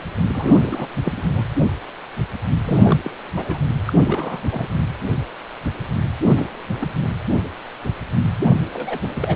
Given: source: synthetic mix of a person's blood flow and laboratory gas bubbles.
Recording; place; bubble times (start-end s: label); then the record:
Doppler ultrasound of blood flow; precordium
0.30-0.57 s: bubbles
0.62-0.89 s: bubbles
1.04-1.21 s: bubbles
1.34-1.43 s: bubbles
2.64-3.00 s: bubbles
3.04-3.10 s: bubbles
3.35-3.59 s: bubbles
3.85-3.93 s: bubbles
4.04-4.42 s: bubbles
4.50-4.68 s: bubbles
6.36-6.46 s: bubbles
6.80-6.88 s: bubbles
8.73-8.98 s: bubbles
9.15-9.36 s: bubbles
From the record:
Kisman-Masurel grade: 221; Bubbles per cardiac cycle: several, 3 to 8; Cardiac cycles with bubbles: 10 to 50%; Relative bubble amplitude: barely perceptible (0.100 to 0.250); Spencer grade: 2 (many but less than half of the cardiac periods contain bubble signals, singularly or in groups); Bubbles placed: anywhere in the cardiac cycle